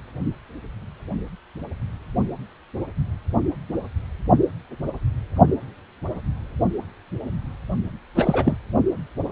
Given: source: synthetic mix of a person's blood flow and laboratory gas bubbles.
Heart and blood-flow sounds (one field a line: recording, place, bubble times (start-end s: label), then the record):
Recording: Doppler ultrasound of blood flow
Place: precordium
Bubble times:
8.15-8.56 s: bubbles
From the record:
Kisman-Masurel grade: 212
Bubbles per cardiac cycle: several, 3 to 8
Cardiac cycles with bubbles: 1 to 10%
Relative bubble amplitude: moderate (0.250 to 0.450)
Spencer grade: 1 (occasional bubble signal discernible with the cardiac motion signal, with majority of cardiac periods free of bubbles)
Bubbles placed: only in the low amplitude regions of the cardiac cycle